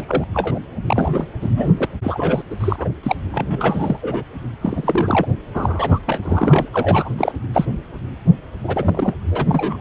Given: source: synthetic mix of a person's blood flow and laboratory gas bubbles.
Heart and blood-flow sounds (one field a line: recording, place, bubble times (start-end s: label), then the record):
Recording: Doppler ultrasound of blood flow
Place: precordium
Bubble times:
0.00-0.24 s: bubbles
0.34-0.59 s: bubbles
0.86-1.27 s: bubbles
1.40-1.85 s: bubbles
2.03-2.42 s: bubbles
2.50-2.56 s: bubbles
2.60-2.89 s: bubbles
3.03-3.16 s: bubbles
3.31-3.99 s: bubbles
4.01-4.24 s: bubbles
4.61-5.26 s: bubbles
5.54-5.99 s: bubbles
6.06-6.69 s: bubbles
6.72-7.09 s: bubbles
7.18-7.32 s: bubbles
7.53-7.65 s: bubbles
8.63-9.13 s: bubbles
9.30-9.46 s: bubbles
9.48-9.81 s: bubbles
From the record:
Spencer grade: 3 (all of the cardiac periods contain showers or single bubble signals, but not dominating or overriding the cardiac motion signals)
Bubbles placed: anywhere in the cardiac cycle